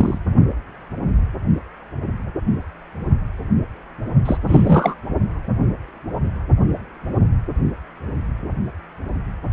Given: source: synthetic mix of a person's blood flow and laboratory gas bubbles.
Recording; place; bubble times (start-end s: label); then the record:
Doppler ultrasound of blood flow; precordium
0.00-0.19 s: bubbles
4.25-4.38 s: bubbles
4.46-4.95 s: bubbles
From the record:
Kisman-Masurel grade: 223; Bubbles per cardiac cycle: several, 3 to 8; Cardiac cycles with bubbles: 10 to 50%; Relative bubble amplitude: loud (0.450 to 0.775); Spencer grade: 2 (many but less than half of the cardiac periods contain bubble signals, singularly or in groups); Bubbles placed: only in the low amplitude regions of the cardiac cycle